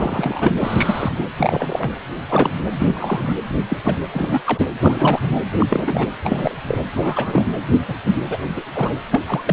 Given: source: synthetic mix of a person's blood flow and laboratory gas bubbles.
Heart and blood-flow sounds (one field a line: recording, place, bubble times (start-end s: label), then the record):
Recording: Doppler ultrasound of blood flow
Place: precordium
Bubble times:
0.00-0.52 s: bubbles
0.60-1.25 s: bubbles
1.38-1.92 s: bubbles
2.28-2.50 s: bubbles
2.71-3.35 s: bubbles
3.69-3.77 s: bubbles
3.83-3.98 s: bubbles
4.12-4.42 s: bubbles
4.46-4.66 s: bubbles
4.81-5.20 s: bubbles
5.22-5.40 s: bubbles
5.60-5.66 s: bubbles
5.69-6.08 s: bubbles
6.24-6.55 s: bubbles
6.67-6.78 s: bubbles
6.93-7.45 s: bubbles
7.71-7.81 s: bubbles
7.88-7.94 s: bubbles
8.04-8.12 s: bubbles
8.29-8.38 s: bubbles
8.55-8.63 s: bubbles
8.74-8.94 s: bubbles
9.12-9.21 s: bubbles
9.27-9.43 s: bubbles
9.47-9.53 s: bubbles
From the record:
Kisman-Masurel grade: 232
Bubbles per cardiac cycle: several, 3 to 8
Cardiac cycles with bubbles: 50 to 99%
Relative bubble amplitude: moderate (0.250 to 0.450)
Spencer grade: 3 (all of the cardiac periods contain showers or single bubble signals, but not dominating or overriding the cardiac motion signals)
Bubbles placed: anywhere in the cardiac cycle